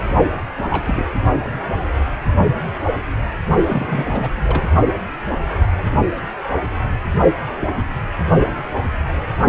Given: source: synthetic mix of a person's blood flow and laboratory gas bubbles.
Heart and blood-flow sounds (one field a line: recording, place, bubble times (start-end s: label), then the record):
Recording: Doppler ultrasound of blood flow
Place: precordium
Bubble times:
0.00-0.03 s: bubbles
0.70-1.05 s: bubbles
3.66-4.29 s: bubbles
4.44-4.62 s: bubbles
From the record:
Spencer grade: 2 (many but less than half of the cardiac periods contain bubble signals, singularly or in groups)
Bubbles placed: only in the low amplitude regions of the cardiac cycle